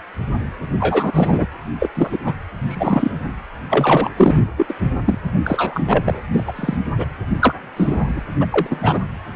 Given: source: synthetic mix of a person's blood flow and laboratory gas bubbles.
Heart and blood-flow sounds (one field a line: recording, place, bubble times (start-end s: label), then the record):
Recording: Doppler ultrasound of blood flow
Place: precordium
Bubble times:
0.79-1.47 s: bubbles
1.79-1.89 s: bubbles
1.95-2.18 s: bubbles
2.25-2.33 s: bubbles
2.67-3.11 s: bubbles
3.69-4.10 s: bubbles
4.16-4.39 s: bubbles
4.57-4.66 s: bubbles
4.69-4.74 s: bubbles
5.04-5.19 s: bubbles
5.44-6.21 s: bubbles
6.34-6.44 s: bubbles
6.46-6.53 s: bubbles
6.55-6.77 s: bubbles
6.95-7.04 s: bubbles
7.39-7.54 s: bubbles
7.76-8.22 s: bubbles
8.40-8.46 s: bubbles
8.51-9.00 s: bubbles
From the record:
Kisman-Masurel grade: 233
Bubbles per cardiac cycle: several, 3 to 8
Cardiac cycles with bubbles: 50 to 99%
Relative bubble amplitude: loud (0.450 to 0.775)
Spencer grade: 3 (all of the cardiac periods contain showers or single bubble signals, but not dominating or overriding the cardiac motion signals)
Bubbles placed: anywhere in the cardiac cycle